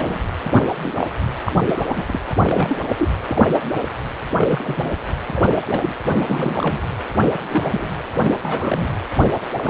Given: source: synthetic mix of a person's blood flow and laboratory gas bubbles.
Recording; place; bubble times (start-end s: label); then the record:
Doppler ultrasound of blood flow; precordium
0.00-0.20 s: bubbles
0.50-0.61 s: bubbles
0.82-1.06 s: bubbles
1.44-1.52 s: bubbles
1.65-2.19 s: bubbles
2.29-2.35 s: bubbles
2.44-2.80 s: bubbles
2.98-3.13 s: bubbles
3.25-3.53 s: bubbles
4.37-4.92 s: bubbles
5.27-5.95 s: bubbles
6.21-6.82 s: bubbles
7.49-7.91 s: bubbles
8.21-8.36 s: bubbles
8.42-8.88 s: bubbles
9.54-9.70 s: bubbles
From the record:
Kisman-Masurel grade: 242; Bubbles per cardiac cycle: several, 3 to 8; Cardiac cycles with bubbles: 100%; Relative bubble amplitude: moderate (0.250 to 0.450); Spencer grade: 3 (all of the cardiac periods contain showers or single bubble signals, but not dominating or overriding the cardiac motion signals); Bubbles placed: anywhere in the cardiac cycle